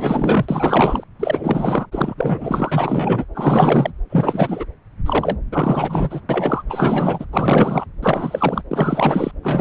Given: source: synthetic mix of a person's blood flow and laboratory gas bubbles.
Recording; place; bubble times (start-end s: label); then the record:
Doppler ultrasound of blood flow; subclavian vein
0.00-0.45 s: bubbles
0.48-1.04 s: bubbles
1.19-1.88 s: bubbles
1.92-2.15 s: bubbles
2.17-3.26 s: bubbles
3.34-3.93 s: bubbles
4.10-4.66 s: bubbles
5.06-5.37 s: bubbles
5.52-6.21 s: bubbles
6.29-6.63 s: bubbles
6.69-7.25 s: bubbles
7.33-7.86 s: bubbles
8.02-8.62 s: bubbles
8.71-9.31 s: bubbles
9.42-9.61 s: bubbles
From the record:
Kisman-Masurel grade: 444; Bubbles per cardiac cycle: continuous sound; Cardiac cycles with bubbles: 100%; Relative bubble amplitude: maximal (0.775 to 0.999); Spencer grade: 4 (maximum detectable bubble signal sounding continuously throughout systole and diastole of every cardiac period, and overriding the amplitude of the normal cardiac signals); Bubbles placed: anywhere in the cardiac cycle